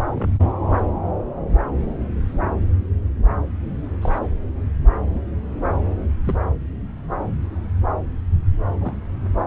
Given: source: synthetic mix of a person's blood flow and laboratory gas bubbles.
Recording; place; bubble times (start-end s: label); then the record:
Doppler ultrasound of blood flow; subclavian vein
0.07-0.10 s: bubbles
0.12-0.39 s: bubbles
4.01-4.19 s: bubbles
5.15-5.20 s: bubbles
6.24-6.36 s: bubbles
8.73-8.75 s: bubbles
8.80-8.97 s: bubbles
From the record:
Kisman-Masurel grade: 121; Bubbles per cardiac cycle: 1 to 2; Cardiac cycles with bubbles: 10 to 50%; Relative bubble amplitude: barely perceptible (0.100 to 0.250); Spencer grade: 2 (many but less than half of the cardiac periods contain bubble signals, singularly or in groups); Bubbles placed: anywhere in the cardiac cycle